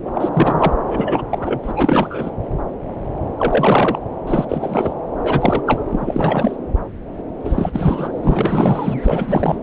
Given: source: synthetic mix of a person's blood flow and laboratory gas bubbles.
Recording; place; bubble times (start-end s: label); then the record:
Doppler ultrasound of blood flow; subclavian vein
0.05-0.12 s: bubbles
0.15-0.29 s: bubbles
0.33-0.73 s: bubbles
0.83-1.23 s: bubbles
1.31-1.72 s: bubbles
1.76-2.30 s: bubbles
3.38-3.99 s: bubbles
4.27-4.45 s: bubbles
4.48-4.93 s: bubbles
5.18-5.83 s: bubbles
5.89-6.56 s: bubbles
7.44-8.12 s: bubbles
8.21-9.59 s: bubbles
From the record:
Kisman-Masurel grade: 333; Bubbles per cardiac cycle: rolling drumbeat, 9 or more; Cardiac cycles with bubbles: 50 to 99%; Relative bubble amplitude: loud (0.450 to 0.775); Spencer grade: 3 (all of the cardiac periods contain showers or single bubble signals, but not dominating or overriding the cardiac motion signals); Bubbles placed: anywhere in the cardiac cycle